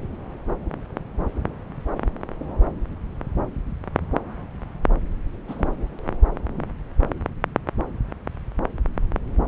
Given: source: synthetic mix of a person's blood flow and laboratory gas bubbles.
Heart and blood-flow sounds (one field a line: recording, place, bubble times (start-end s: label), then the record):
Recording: Doppler ultrasound of blood flow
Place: subclavian vein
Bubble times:
5.48-5.70 s: bubbles
From the record:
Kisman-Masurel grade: 121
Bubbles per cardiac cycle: 1 to 2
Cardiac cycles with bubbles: 10 to 50%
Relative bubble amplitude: barely perceptible (0.100 to 0.250)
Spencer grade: 2 (many but less than half of the cardiac periods contain bubble signals, singularly or in groups)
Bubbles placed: anywhere in the cardiac cycle